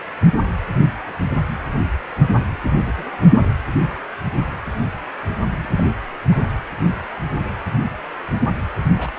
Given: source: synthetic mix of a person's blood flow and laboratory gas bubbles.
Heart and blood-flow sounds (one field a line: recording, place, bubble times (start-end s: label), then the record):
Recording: Doppler ultrasound of blood flow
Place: precordium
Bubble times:
2.86-3.23 s: bubbles
5.42-5.83 s: bubbles
6.30-6.39 s: bubbles
8.99-9.11 s: bubbles
From the record:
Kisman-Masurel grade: 121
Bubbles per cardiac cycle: 1 to 2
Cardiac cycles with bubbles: 10 to 50%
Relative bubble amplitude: barely perceptible (0.100 to 0.250)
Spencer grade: 2 (many but less than half of the cardiac periods contain bubble signals, singularly or in groups)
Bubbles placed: anywhere in the cardiac cycle